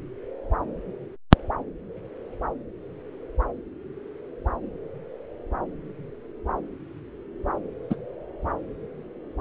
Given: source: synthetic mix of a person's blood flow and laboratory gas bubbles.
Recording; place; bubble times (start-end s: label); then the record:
Doppler ultrasound of blood flow; subclavian vein
7.90-7.95 s: bubbles
From the record:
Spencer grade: 1 (occasional bubble signal discernible with the cardiac motion signal, with majority of cardiac periods free of bubbles); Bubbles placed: anywhere in the cardiac cycle